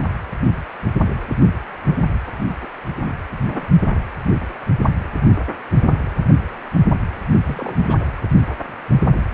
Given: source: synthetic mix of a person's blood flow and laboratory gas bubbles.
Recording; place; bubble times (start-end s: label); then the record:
Doppler ultrasound of blood flow; precordium
2.62-2.68 s: bubbles
3.05-3.16 s: bubbles
3.42-3.69 s: bubbles
7.45-8.00 s: bubbles
From the record:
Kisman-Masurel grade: 221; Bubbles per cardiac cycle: several, 3 to 8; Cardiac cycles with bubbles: 10 to 50%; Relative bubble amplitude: barely perceptible (0.100 to 0.250); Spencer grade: 2 (many but less than half of the cardiac periods contain bubble signals, singularly or in groups); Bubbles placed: only in the low amplitude regions of the cardiac cycle